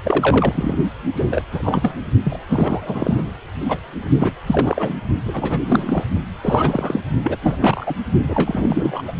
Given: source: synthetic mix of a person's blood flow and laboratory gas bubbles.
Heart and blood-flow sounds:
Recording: Doppler ultrasound of blood flow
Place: precordium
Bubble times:
0.03-0.86 s: bubbles
1.15-1.25 s: bubbles
1.31-1.42 s: bubbles
1.52-1.92 s: bubbles
2.24-2.39 s: bubbles
2.48-3.31 s: bubbles
3.68-3.79 s: bubbles
4.19-4.31 s: bubbles
4.46-4.94 s: bubbles
5.25-6.04 s: bubbles
6.43-7.00 s: bubbles
7.23-7.37 s: bubbles
7.42-7.94 s: bubbles
8.22-9.02 s: bubbles
9.07-9.12 s: bubbles
From the record:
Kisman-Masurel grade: 342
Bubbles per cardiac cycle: rolling drumbeat, 9 or more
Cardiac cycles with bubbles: 100%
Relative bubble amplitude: moderate (0.250 to 0.450)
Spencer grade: 3 (all of the cardiac periods contain showers or single bubble signals, but not dominating or overriding the cardiac motion signals)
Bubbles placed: only in the low amplitude regions of the cardiac cycle

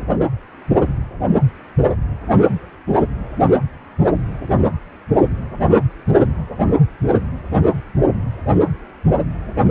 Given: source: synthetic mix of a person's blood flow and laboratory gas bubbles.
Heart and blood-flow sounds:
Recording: Doppler ultrasound of blood flow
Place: precordium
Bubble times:
no bubbles
From the record:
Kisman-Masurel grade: 000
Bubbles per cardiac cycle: 0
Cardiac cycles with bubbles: 0%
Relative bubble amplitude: no bubbles discernible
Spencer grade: 0 (complete lack of bubble signals)

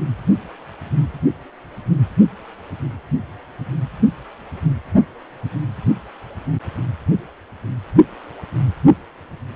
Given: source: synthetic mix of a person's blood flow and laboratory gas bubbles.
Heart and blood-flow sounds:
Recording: Doppler ultrasound of blood flow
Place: precordium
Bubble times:
no bubbles
From the record:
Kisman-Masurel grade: 000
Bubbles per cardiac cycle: 0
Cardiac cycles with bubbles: 0%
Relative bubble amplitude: no bubbles discernible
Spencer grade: 0 (complete lack of bubble signals)

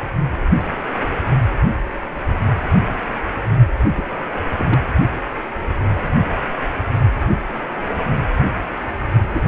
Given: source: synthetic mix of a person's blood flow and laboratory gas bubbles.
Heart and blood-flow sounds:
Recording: Doppler ultrasound of blood flow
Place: precordium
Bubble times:
3.97-4.04 s: bubbles
4.59-4.65 s: bubbles
4.69-4.79 s: bubbles
9.30-9.40 s: bubbles
9.45-9.47 s: bubbles
From the record:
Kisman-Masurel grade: 222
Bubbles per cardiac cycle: several, 3 to 8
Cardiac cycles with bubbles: 10 to 50%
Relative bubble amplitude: moderate (0.250 to 0.450)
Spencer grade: 2 (many but less than half of the cardiac periods contain bubble signals, singularly or in groups)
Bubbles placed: only in the low amplitude regions of the cardiac cycle

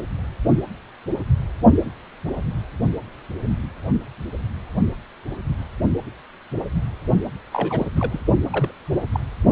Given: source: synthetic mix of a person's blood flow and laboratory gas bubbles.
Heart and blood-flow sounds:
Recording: Doppler ultrasound of blood flow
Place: precordium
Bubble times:
7.52-7.87 s: bubbles
7.96-8.20 s: bubbles
8.50-8.71 s: bubbles
9.12-9.20 s: bubbles
From the record:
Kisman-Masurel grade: 221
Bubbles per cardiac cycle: several, 3 to 8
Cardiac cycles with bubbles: 10 to 50%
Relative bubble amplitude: barely perceptible (0.100 to 0.250)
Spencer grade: 2 (many but less than half of the cardiac periods contain bubble signals, singularly or in groups)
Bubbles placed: only in the low amplitude regions of the cardiac cycle

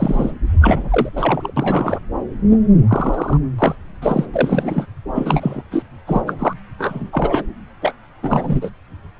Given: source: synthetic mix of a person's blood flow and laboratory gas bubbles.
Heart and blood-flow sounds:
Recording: Doppler ultrasound of blood flow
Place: subclavian vein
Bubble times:
0.00-0.34 s: bubbles
0.60-1.09 s: bubbles
1.14-1.52 s: bubbles
1.56-1.99 s: bubbles
2.50-2.58 s: bubbles
2.88-3.38 s: bubbles
3.58-3.75 s: bubbles
4.02-4.25 s: bubbles
4.33-4.86 s: bubbles
5.14-5.62 s: bubbles
5.71-5.83 s: bubbles
6.07-6.21 s: bubbles
6.27-6.33 s: bubbles
6.38-6.54 s: bubbles
6.78-7.42 s: bubbles
7.81-7.93 s: bubbles
8.22-8.70 s: bubbles
From the record:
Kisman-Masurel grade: 243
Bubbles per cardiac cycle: several, 3 to 8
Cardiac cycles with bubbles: 100%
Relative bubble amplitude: loud (0.450 to 0.775)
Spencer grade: 3 (all of the cardiac periods contain showers or single bubble signals, but not dominating or overriding the cardiac motion signals)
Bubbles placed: anywhere in the cardiac cycle

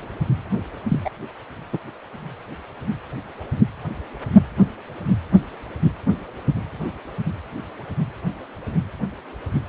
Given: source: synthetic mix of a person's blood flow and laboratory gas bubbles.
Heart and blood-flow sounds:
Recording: Doppler ultrasound of blood flow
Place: precordium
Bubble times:
0.90-1.00 s: bubbles
1.05-1.10 s: bubbles
1.72-1.78 s: bubbles
From the record:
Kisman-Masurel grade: 212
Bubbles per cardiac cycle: several, 3 to 8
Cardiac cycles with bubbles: 1 to 10%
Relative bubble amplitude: moderate (0.250 to 0.450)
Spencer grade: 1 (occasional bubble signal discernible with the cardiac motion signal, with majority of cardiac periods free of bubbles)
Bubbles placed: anywhere in the cardiac cycle

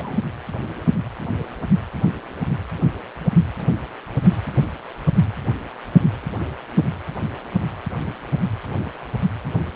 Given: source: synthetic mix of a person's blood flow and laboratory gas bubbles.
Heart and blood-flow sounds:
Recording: Doppler ultrasound of blood flow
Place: precordium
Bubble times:
0.00-0.20 s: bubbles
From the record:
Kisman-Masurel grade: 211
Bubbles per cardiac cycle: several, 3 to 8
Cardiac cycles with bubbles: 1 to 10%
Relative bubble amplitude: barely perceptible (0.100 to 0.250)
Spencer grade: 1 (occasional bubble signal discernible with the cardiac motion signal, with majority of cardiac periods free of bubbles)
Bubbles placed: anywhere in the cardiac cycle

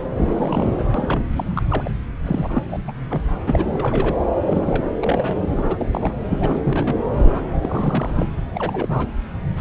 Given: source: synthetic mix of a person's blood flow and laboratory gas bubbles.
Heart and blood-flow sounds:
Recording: Doppler ultrasound of blood flow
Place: subclavian vein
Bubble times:
0.15-0.71 s: bubbles
0.77-0.84 s: bubbles
0.94-1.28 s: bubbles
1.34-1.63 s: bubbles
1.69-1.89 s: bubbles
2.23-2.63 s: bubbles
2.68-2.79 s: bubbles
2.88-2.92 s: bubbles
3.10-3.30 s: bubbles
3.47-4.15 s: bubbles
4.44-4.88 s: bubbles
5.00-5.35 s: bubbles
5.56-5.87 s: bubbles
5.93-6.12 s: bubbles
6.31-6.57 s: bubbles
6.63-6.96 s: bubbles
7.13-7.42 s: bubbles
7.62-8.28 s: bubbles
8.54-9.11 s: bubbles
9.56-9.61 s: bubbles
From the record:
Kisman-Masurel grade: 342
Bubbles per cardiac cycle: rolling drumbeat, 9 or more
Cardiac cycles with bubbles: 100%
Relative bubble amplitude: moderate (0.250 to 0.450)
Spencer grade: 3 (all of the cardiac periods contain showers or single bubble signals, but not dominating or overriding the cardiac motion signals)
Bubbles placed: anywhere in the cardiac cycle

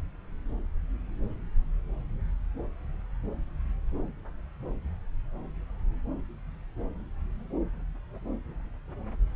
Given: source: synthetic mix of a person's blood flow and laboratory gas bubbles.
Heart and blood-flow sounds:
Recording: Doppler ultrasound of blood flow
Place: subclavian vein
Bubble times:
no bubbles
From the record:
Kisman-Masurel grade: 000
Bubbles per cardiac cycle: 0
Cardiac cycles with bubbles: 0%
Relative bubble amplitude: no bubbles discernible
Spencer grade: 0 (complete lack of bubble signals)

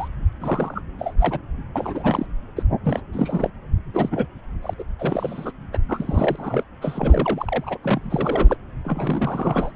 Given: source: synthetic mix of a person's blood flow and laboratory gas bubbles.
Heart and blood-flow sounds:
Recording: Doppler ultrasound of blood flow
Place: subclavian vein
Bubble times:
0.00-0.08 s: bubbles
0.40-0.82 s: bubbles
0.99-1.14 s: bubbles
1.19-1.40 s: bubbles
1.75-2.27 s: bubbles
2.56-2.63 s: bubbles
2.84-3.02 s: bubbles
3.13-3.50 s: bubbles
3.94-4.26 s: bubbles
4.62-4.74 s: bubbles
4.79-4.84 s: bubbles
4.99-5.52 s: bubbles
5.73-5.78 s: bubbles
5.88-6.63 s: bubbles
6.81-7.78 s: bubbles
7.83-8.57 s: bubbles
8.84-9.71 s: bubbles
From the record:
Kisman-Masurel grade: 342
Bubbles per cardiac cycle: rolling drumbeat, 9 or more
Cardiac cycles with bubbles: 100%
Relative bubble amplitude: moderate (0.250 to 0.450)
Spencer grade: 3 (all of the cardiac periods contain showers or single bubble signals, but not dominating or overriding the cardiac motion signals)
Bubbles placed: anywhere in the cardiac cycle

